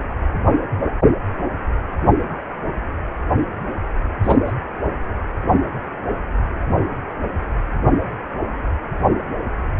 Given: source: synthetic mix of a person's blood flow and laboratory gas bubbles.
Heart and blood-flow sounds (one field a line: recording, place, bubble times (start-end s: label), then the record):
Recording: Doppler ultrasound of blood flow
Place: precordium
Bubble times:
4.23-4.36 s: bubbles
4.46-4.52 s: bubbles
From the record:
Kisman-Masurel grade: 212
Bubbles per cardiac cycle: several, 3 to 8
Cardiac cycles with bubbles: 1 to 10%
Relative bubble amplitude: moderate (0.250 to 0.450)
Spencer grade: 1 (occasional bubble signal discernible with the cardiac motion signal, with majority of cardiac periods free of bubbles)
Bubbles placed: anywhere in the cardiac cycle